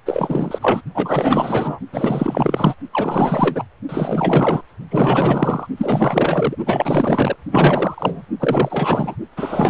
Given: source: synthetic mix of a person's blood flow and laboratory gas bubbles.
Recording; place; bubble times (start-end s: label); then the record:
Doppler ultrasound of blood flow; precordium
0.06-0.81 s: bubbles
0.94-1.79 s: bubbles
1.92-2.75 s: bubbles
2.92-3.65 s: bubbles
3.89-4.62 s: bubbles
4.91-5.67 s: bubbles
5.77-6.56 s: bubbles
6.66-7.37 s: bubbles
7.51-8.22 s: bubbles
8.39-9.15 s: bubbles
9.36-9.70 s: bubbles
From the record:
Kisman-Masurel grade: 444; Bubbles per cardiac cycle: continuous sound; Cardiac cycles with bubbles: 100%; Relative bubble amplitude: maximal (0.775 to 0.999); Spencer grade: 4 (maximum detectable bubble signal sounding continuously throughout systole and diastole of every cardiac period, and overriding the amplitude of the normal cardiac signals); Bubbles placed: only in the low amplitude regions of the cardiac cycle